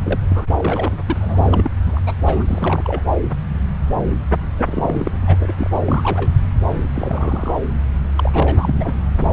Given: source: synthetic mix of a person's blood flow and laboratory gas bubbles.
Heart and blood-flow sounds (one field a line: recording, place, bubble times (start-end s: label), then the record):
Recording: Doppler ultrasound of blood flow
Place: subclavian vein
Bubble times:
0.04-0.20 s: bubbles
0.29-0.46 s: bubbles
0.55-0.98 s: bubbles
1.06-1.17 s: bubbles
1.21-1.70 s: bubbles
1.86-1.99 s: bubbles
2.06-2.13 s: bubbles
2.25-2.45 s: bubbles
2.48-3.02 s: bubbles
4.57-5.11 s: bubbles
5.27-5.36 s: bubbles
5.40-5.53 s: bubbles
5.57-5.80 s: bubbles
5.85-6.31 s: bubbles
6.68-6.74 s: bubbles
6.94-7.57 s: bubbles
8.16-8.94 s: bubbles
From the record:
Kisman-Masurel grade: 332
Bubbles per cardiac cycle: rolling drumbeat, 9 or more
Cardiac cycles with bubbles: 50 to 99%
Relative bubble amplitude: moderate (0.250 to 0.450)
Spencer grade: 3 (all of the cardiac periods contain showers or single bubble signals, but not dominating or overriding the cardiac motion signals)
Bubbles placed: anywhere in the cardiac cycle